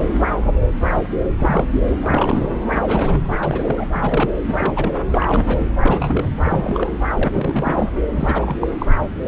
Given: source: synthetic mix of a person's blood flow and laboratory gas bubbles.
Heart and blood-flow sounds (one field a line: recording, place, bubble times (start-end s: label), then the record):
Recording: Doppler ultrasound of blood flow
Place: subclavian vein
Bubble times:
0.00-0.02 s: bubbles
1.40-1.70 s: bubbles
1.75-1.80 s: bubbles
2.02-2.48 s: bubbles
2.71-2.80 s: bubbles
2.83-3.21 s: bubbles
3.28-3.87 s: bubbles
3.92-4.30 s: bubbles
4.47-4.92 s: bubbles
5.09-5.69 s: bubbles
5.80-6.29 s: bubbles
6.43-6.97 s: bubbles
7.13-7.90 s: bubbles
8.12-8.56 s: bubbles
8.59-8.67 s: bubbles
8.78-8.86 s: bubbles
From the record:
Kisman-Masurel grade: 332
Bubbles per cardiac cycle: rolling drumbeat, 9 or more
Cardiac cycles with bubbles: 50 to 99%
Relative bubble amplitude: moderate (0.250 to 0.450)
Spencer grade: 3 (all of the cardiac periods contain showers or single bubble signals, but not dominating or overriding the cardiac motion signals)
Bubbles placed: anywhere in the cardiac cycle